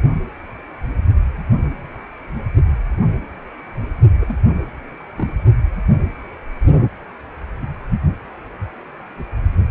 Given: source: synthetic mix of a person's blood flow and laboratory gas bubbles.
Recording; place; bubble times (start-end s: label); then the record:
Doppler ultrasound of blood flow; precordium
4.20-4.37 s: bubbles
5.17-5.28 s: bubbles
From the record:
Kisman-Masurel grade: 221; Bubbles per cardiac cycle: several, 3 to 8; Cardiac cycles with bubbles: 10 to 50%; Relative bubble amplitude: barely perceptible (0.100 to 0.250); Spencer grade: 2 (many but less than half of the cardiac periods contain bubble signals, singularly or in groups); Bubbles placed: only in the low amplitude regions of the cardiac cycle